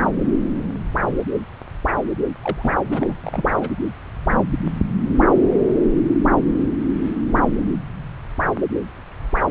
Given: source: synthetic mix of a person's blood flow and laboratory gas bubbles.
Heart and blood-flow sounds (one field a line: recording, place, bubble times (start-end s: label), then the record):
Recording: Doppler ultrasound of blood flow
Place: subclavian vein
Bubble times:
2.41-3.15 s: bubbles
3.23-3.49 s: bubbles
3.60-3.70 s: bubbles
From the record:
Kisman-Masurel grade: 212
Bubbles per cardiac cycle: several, 3 to 8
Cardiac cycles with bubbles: 1 to 10%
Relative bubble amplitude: moderate (0.250 to 0.450)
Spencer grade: 1 (occasional bubble signal discernible with the cardiac motion signal, with majority of cardiac periods free of bubbles)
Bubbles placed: anywhere in the cardiac cycle